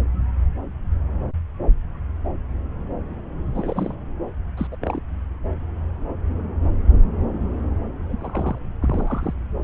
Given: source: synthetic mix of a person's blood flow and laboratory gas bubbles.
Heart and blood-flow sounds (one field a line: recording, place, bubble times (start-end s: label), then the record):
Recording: Doppler ultrasound of blood flow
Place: subclavian vein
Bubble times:
3.54-3.94 s: bubbles
4.57-4.67 s: bubbles
4.71-4.76 s: bubbles
4.81-5.00 s: bubbles
8.09-8.17 s: bubbles
8.20-8.59 s: bubbles
8.80-9.34 s: bubbles
From the record:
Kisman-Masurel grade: 221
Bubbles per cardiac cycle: several, 3 to 8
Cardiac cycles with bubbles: 10 to 50%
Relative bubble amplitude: barely perceptible (0.100 to 0.250)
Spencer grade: 2 (many but less than half of the cardiac periods contain bubble signals, singularly or in groups)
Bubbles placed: anywhere in the cardiac cycle